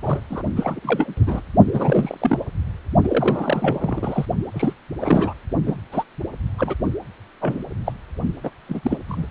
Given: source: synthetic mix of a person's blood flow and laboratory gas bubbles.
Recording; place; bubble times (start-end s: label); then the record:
Doppler ultrasound of blood flow; precordium
0.02-0.20 s: bubbles
0.30-0.42 s: bubbles
0.56-0.79 s: bubbles
0.82-1.41 s: bubbles
1.74-2.39 s: bubbles
3.03-4.25 s: bubbles
4.54-4.73 s: bubbles
5.00-5.34 s: bubbles
5.66-5.79 s: bubbles
5.92-6.04 s: bubbles
6.58-6.75 s: bubbles
7.41-7.62 s: bubbles
7.86-7.92 s: bubbles
8.44-8.51 s: bubbles
8.69-8.97 s: bubbles
9.08-9.27 s: bubbles
From the record:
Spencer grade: 3 (all of the cardiac periods contain showers or single bubble signals, but not dominating or overriding the cardiac motion signals); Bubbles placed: only in the low amplitude regions of the cardiac cycle